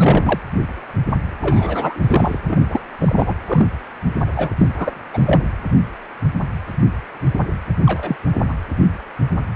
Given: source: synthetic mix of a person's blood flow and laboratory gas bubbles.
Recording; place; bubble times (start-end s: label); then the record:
Doppler ultrasound of blood flow; precordium
0.00-0.39 s: bubbles
1.42-2.40 s: bubbles
2.49-2.80 s: bubbles
3.00-3.34 s: bubbles
3.46-3.67 s: bubbles
4.20-4.26 s: bubbles
4.35-4.50 s: bubbles
4.58-4.67 s: bubbles
4.78-4.92 s: bubbles
5.13-5.42 s: bubbles
7.86-8.16 s: bubbles
8.48-8.54 s: bubbles
From the record:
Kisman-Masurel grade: 233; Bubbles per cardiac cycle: several, 3 to 8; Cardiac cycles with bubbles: 50 to 99%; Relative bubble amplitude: loud (0.450 to 0.775); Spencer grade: 3 (all of the cardiac periods contain showers or single bubble signals, but not dominating or overriding the cardiac motion signals); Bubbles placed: anywhere in the cardiac cycle